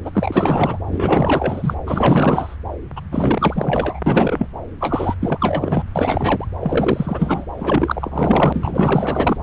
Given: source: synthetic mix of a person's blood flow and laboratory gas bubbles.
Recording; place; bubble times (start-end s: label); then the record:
Doppler ultrasound of blood flow; subclavian vein
0.05-0.79 s: bubbles
0.88-1.76 s: bubbles
1.87-2.56 s: bubbles
2.96-3.00 s: bubbles
3.11-3.99 s: bubbles
4.06-4.46 s: bubbles
4.80-5.16 s: bubbles
5.20-5.83 s: bubbles
5.95-6.48 s: bubbles
6.60-7.45 s: bubbles
7.57-9.37 s: bubbles
From the record:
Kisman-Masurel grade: 444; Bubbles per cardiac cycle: continuous sound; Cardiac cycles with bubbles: 100%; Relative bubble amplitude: maximal (0.775 to 0.999); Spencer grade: 4 (maximum detectable bubble signal sounding continuously throughout systole and diastole of every cardiac period, and overriding the amplitude of the normal cardiac signals); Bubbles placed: anywhere in the cardiac cycle